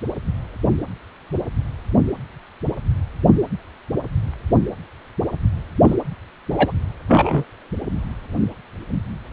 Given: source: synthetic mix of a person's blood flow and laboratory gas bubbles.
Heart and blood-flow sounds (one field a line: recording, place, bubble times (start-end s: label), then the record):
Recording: Doppler ultrasound of blood flow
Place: precordium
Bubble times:
5.82-5.96 s: bubbles
6.50-6.72 s: bubbles
7.08-7.44 s: bubbles
From the record:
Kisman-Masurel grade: 123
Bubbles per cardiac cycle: 1 to 2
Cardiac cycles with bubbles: 10 to 50%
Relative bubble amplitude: loud (0.450 to 0.775)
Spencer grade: 2 (many but less than half of the cardiac periods contain bubble signals, singularly or in groups)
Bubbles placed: anywhere in the cardiac cycle